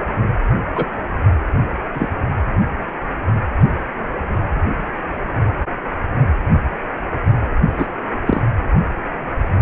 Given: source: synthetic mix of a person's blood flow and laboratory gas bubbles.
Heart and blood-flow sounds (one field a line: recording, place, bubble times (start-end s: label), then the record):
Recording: Doppler ultrasound of blood flow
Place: precordium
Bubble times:
0.75-0.86 s: bubbles
1.94-2.09 s: bubbles
7.75-7.87 s: bubbles
8.27-8.42 s: bubbles
From the record:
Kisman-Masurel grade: 123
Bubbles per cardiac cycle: 1 to 2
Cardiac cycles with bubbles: 10 to 50%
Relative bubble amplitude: loud (0.450 to 0.775)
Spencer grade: 2 (many but less than half of the cardiac periods contain bubble signals, singularly or in groups)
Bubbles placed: anywhere in the cardiac cycle